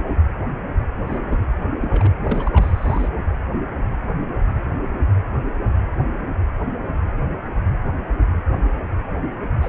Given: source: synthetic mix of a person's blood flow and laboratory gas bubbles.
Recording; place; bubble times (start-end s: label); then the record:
Doppler ultrasound of blood flow; precordium
1.07-1.47 s: bubbles
1.81-2.12 s: bubbles
2.15-3.09 s: bubbles
9.62-9.69 s: bubbles
From the record:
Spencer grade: 2 (many but less than half of the cardiac periods contain bubble signals, singularly or in groups); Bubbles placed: anywhere in the cardiac cycle